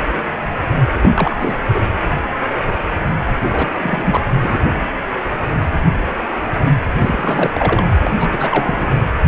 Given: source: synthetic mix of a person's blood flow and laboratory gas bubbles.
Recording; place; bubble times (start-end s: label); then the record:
Doppler ultrasound of blood flow; precordium
1.02-1.10 s: bubbles
1.15-1.36 s: bubbles
1.39-1.55 s: bubbles
1.74-1.81 s: bubbles
3.52-3.67 s: bubbles
3.81-4.21 s: bubbles
4.38-4.59 s: bubbles
7.01-7.50 s: bubbles
7.54-7.91 s: bubbles
8.04-8.11 s: bubbles
8.17-8.87 s: bubbles
8.93-8.99 s: bubbles
From the record:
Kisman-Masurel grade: 222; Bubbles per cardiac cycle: several, 3 to 8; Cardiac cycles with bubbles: 10 to 50%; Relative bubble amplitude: moderate (0.250 to 0.450); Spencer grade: 2 (many but less than half of the cardiac periods contain bubble signals, singularly or in groups); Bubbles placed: anywhere in the cardiac cycle